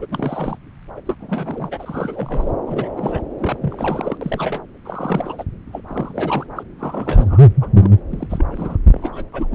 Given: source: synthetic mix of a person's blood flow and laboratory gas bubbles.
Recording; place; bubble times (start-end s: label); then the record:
Doppler ultrasound of blood flow; subclavian vein
0.00-0.06 s: bubbles
0.11-0.57 s: bubbles
0.96-1.01 s: bubbles
1.06-1.16 s: bubbles
1.20-1.69 s: bubbles
1.71-2.52 s: bubbles
2.67-2.89 s: bubbles
2.97-3.22 s: bubbles
3.39-3.58 s: bubbles
3.61-4.17 s: bubbles
4.21-4.67 s: bubbles
4.85-5.43 s: bubbles
5.66-5.81 s: bubbles
5.87-6.46 s: bubbles
6.55-6.63 s: bubbles
6.78-7.39 s: bubbles
7.61-7.68 s: bubbles
7.74-7.90 s: bubbles
8.11-8.26 s: bubbles
8.29-8.77 s: bubbles
8.92-9.24 s: bubbles
9.33-9.47 s: bubbles
9.50-9.55 s: bubbles
From the record:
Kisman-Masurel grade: 342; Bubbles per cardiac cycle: rolling drumbeat, 9 or more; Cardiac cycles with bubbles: 100%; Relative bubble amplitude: moderate (0.250 to 0.450); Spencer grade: 3 (all of the cardiac periods contain showers or single bubble signals, but not dominating or overriding the cardiac motion signals); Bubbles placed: anywhere in the cardiac cycle